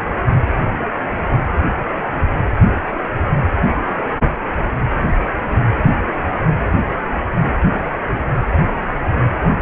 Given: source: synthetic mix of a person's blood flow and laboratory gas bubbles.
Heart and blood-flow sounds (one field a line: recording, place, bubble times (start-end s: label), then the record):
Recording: Doppler ultrasound of blood flow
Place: precordium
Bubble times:
6.86-6.95 s: bubbles
From the record:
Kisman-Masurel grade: 111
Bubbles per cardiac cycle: 1 to 2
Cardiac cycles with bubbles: 1 to 10%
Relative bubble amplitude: barely perceptible (0.100 to 0.250)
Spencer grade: 1 (occasional bubble signal discernible with the cardiac motion signal, with majority of cardiac periods free of bubbles)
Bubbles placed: anywhere in the cardiac cycle